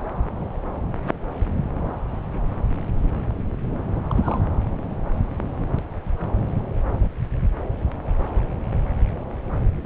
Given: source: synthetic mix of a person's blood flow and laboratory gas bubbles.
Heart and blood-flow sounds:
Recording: Doppler ultrasound of blood flow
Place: subclavian vein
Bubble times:
4.08-4.40 s: bubbles
From the record:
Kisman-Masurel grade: 211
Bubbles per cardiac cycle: several, 3 to 8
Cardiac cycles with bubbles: 1 to 10%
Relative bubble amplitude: barely perceptible (0.100 to 0.250)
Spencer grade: 1 (occasional bubble signal discernible with the cardiac motion signal, with majority of cardiac periods free of bubbles)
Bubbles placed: anywhere in the cardiac cycle

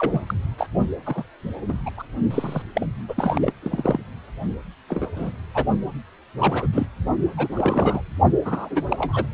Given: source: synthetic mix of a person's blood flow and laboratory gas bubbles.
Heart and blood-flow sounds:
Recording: Doppler ultrasound of blood flow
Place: precordium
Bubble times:
0.00-0.21 s: bubbles
0.27-0.34 s: bubbles
0.58-0.67 s: bubbles
1.05-1.24 s: bubbles
1.68-1.74 s: bubbles
1.85-1.90 s: bubbles
1.96-2.03 s: bubbles
2.31-2.62 s: bubbles
2.75-2.87 s: bubbles
3.08-3.52 s: bubbles
3.62-4.03 s: bubbles
4.88-5.07 s: bubbles
5.16-5.32 s: bubbles
5.54-5.64 s: bubbles
6.39-6.67 s: bubbles
6.72-6.86 s: bubbles
7.37-7.48 s: bubbles
7.56-8.01 s: bubbles
8.45-8.82 s: bubbles
8.88-9.26 s: bubbles
From the record:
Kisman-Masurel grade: 242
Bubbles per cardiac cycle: several, 3 to 8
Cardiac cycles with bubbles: 100%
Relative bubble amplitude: moderate (0.250 to 0.450)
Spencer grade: 3 (all of the cardiac periods contain showers or single bubble signals, but not dominating or overriding the cardiac motion signals)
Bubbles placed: only in the low amplitude regions of the cardiac cycle

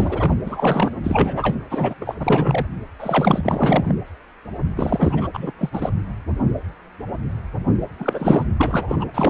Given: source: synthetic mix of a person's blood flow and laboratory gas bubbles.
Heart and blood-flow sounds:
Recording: Doppler ultrasound of blood flow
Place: precordium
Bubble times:
0.00-0.38 s: bubbles
0.45-0.91 s: bubbles
1.03-1.55 s: bubbles
1.69-2.17 s: bubbles
2.19-2.67 s: bubbles
3.00-3.92 s: bubbles
4.76-5.28 s: bubbles
5.33-5.53 s: bubbles
5.58-5.70 s: bubbles
5.72-5.89 s: bubbles
7.99-8.46 s: bubbles
8.60-9.05 s: bubbles
9.14-9.30 s: bubbles
From the record:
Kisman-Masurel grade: 333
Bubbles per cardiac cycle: rolling drumbeat, 9 or more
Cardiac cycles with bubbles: 50 to 99%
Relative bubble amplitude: loud (0.450 to 0.775)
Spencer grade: 3 (all of the cardiac periods contain showers or single bubble signals, but not dominating or overriding the cardiac motion signals)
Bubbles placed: anywhere in the cardiac cycle

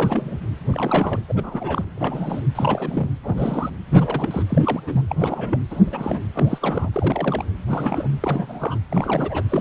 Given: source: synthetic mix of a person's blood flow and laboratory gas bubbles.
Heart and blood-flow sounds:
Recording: Doppler ultrasound of blood flow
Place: precordium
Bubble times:
0.00-0.39 s: bubbles
0.71-1.19 s: bubbles
1.28-1.84 s: bubbles
1.96-2.42 s: bubbles
2.55-3.09 s: bubbles
3.23-3.70 s: bubbles
3.90-4.43 s: bubbles
4.49-4.80 s: bubbles
4.87-5.01 s: bubbles
5.09-5.16 s: bubbles
5.18-5.59 s: bubbles
5.70-5.80 s: bubbles
5.85-6.21 s: bubbles
6.33-6.58 s: bubbles
6.62-6.89 s: bubbles
6.92-7.49 s: bubbles
7.68-8.08 s: bubbles
8.20-8.79 s: bubbles
8.89-9.43 s: bubbles
9.48-9.61 s: bubbles
From the record:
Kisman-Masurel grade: 342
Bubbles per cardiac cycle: rolling drumbeat, 9 or more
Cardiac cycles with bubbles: 100%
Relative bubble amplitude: moderate (0.250 to 0.450)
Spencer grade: 3 (all of the cardiac periods contain showers or single bubble signals, but not dominating or overriding the cardiac motion signals)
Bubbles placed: anywhere in the cardiac cycle

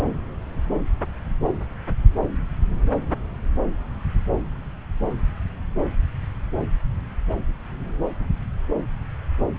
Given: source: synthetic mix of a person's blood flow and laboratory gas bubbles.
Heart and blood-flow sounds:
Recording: Doppler ultrasound of blood flow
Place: subclavian vein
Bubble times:
0.00-0.04 s: bubbles
From the record:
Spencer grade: 1 (occasional bubble signal discernible with the cardiac motion signal, with majority of cardiac periods free of bubbles)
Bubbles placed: anywhere in the cardiac cycle

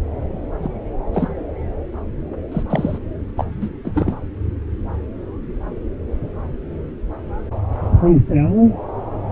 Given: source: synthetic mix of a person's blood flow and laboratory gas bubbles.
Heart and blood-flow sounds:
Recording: Doppler ultrasound of blood flow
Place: subclavian vein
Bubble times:
0.62-0.70 s: bubbles
1.14-1.29 s: bubbles
2.52-2.63 s: bubbles
2.70-2.98 s: bubbles
3.37-3.45 s: bubbles
3.60-3.69 s: bubbles
3.85-4.15 s: bubbles
From the record:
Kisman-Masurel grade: 222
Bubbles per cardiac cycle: several, 3 to 8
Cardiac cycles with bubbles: 10 to 50%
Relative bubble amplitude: moderate (0.250 to 0.450)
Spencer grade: 2 (many but less than half of the cardiac periods contain bubble signals, singularly or in groups)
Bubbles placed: anywhere in the cardiac cycle

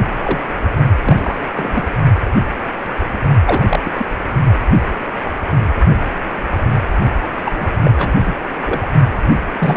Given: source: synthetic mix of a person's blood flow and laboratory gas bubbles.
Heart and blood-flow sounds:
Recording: Doppler ultrasound of blood flow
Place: precordium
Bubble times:
0.23-0.43 s: bubbles
1.04-1.40 s: bubbles
1.56-1.85 s: bubbles
3.46-3.64 s: bubbles
3.69-3.80 s: bubbles
3.84-4.06 s: bubbles
7.45-7.75 s: bubbles
7.84-7.91 s: bubbles
7.97-8.12 s: bubbles
8.25-8.33 s: bubbles
8.65-8.87 s: bubbles
9.54-9.77 s: bubbles
From the record:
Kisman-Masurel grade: 232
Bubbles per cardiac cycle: several, 3 to 8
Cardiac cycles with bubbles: 50 to 99%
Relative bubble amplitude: moderate (0.250 to 0.450)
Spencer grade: 3 (all of the cardiac periods contain showers or single bubble signals, but not dominating or overriding the cardiac motion signals)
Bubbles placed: only in the low amplitude regions of the cardiac cycle

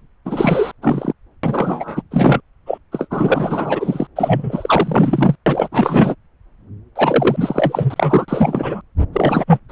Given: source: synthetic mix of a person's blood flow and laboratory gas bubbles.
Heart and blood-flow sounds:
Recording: Doppler ultrasound of blood flow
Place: subclavian vein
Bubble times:
0.25-0.71 s: bubbles
0.82-1.13 s: bubbles
1.43-2.02 s: bubbles
2.11-2.40 s: bubbles
2.66-2.78 s: bubbles
2.92-3.07 s: bubbles
3.10-4.07 s: bubbles
4.16-5.36 s: bubbles
5.46-5.69 s: bubbles
5.72-6.15 s: bubbles
6.96-8.25 s: bubbles
8.28-8.81 s: bubbles
9.13-9.45 s: bubbles
9.47-9.59 s: bubbles
9.69-9.72 s: bubbles
From the record:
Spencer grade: 4 (maximum detectable bubble signal sounding continuously throughout systole and diastole of every cardiac period, and overriding the amplitude of the normal cardiac signals)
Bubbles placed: anywhere in the cardiac cycle

